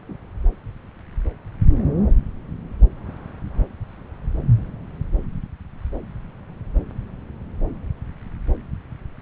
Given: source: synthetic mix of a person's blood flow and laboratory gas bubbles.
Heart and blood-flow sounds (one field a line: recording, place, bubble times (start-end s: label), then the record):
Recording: Doppler ultrasound of blood flow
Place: subclavian vein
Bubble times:
0.09-0.17 s: bubbles
From the record:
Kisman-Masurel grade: 111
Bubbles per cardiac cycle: 1 to 2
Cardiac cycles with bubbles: 1 to 10%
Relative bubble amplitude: barely perceptible (0.100 to 0.250)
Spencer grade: 1 (occasional bubble signal discernible with the cardiac motion signal, with majority of cardiac periods free of bubbles)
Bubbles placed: anywhere in the cardiac cycle